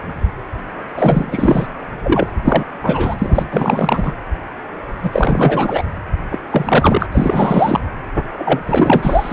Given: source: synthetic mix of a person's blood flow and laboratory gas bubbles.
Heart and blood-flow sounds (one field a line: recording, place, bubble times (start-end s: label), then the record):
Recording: Doppler ultrasound of blood flow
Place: precordium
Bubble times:
0.96-1.67 s: bubbles
2.04-2.31 s: bubbles
2.44-2.65 s: bubbles
2.82-3.46 s: bubbles
3.51-4.13 s: bubbles
5.03-5.88 s: bubbles
6.31-6.38 s: bubbles
6.50-7.07 s: bubbles
7.12-7.80 s: bubbles
8.37-8.60 s: bubbles
8.66-9.33 s: bubbles
From the record:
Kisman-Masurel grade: 333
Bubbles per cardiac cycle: rolling drumbeat, 9 or more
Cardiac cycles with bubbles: 50 to 99%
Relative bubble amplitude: loud (0.450 to 0.775)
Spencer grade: 3 (all of the cardiac periods contain showers or single bubble signals, but not dominating or overriding the cardiac motion signals)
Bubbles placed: anywhere in the cardiac cycle